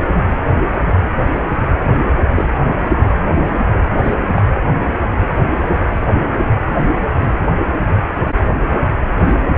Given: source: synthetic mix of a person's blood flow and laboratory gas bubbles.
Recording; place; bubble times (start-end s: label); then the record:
Doppler ultrasound of blood flow; precordium
2.34-2.48 s: bubbles
4.03-4.14 s: bubbles
4.36-4.44 s: bubbles
From the record:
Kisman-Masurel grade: 122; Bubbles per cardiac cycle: 1 to 2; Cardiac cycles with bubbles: 10 to 50%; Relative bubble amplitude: moderate (0.250 to 0.450); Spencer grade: 2 (many but less than half of the cardiac periods contain bubble signals, singularly or in groups); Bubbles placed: anywhere in the cardiac cycle